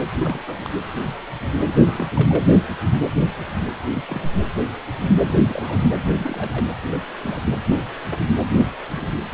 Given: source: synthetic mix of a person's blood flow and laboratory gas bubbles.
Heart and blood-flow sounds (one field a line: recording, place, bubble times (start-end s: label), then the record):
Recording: Doppler ultrasound of blood flow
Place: precordium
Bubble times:
0.18-0.42 s: bubbles
0.47-0.71 s: bubbles
1.84-2.44 s: bubbles
3.88-4.02 s: bubbles
4.07-4.29 s: bubbles
5.22-5.90 s: bubbles
6.18-6.66 s: bubbles
6.91-7.00 s: bubbles
7.13-7.17 s: bubbles
7.22-7.42 s: bubbles
8.60-8.65 s: bubbles
8.96-9.07 s: bubbles
9.32-9.34 s: bubbles
From the record:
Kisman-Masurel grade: 221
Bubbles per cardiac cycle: several, 3 to 8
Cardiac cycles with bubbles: 10 to 50%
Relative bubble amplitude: barely perceptible (0.100 to 0.250)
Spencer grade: 2 (many but less than half of the cardiac periods contain bubble signals, singularly or in groups)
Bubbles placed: anywhere in the cardiac cycle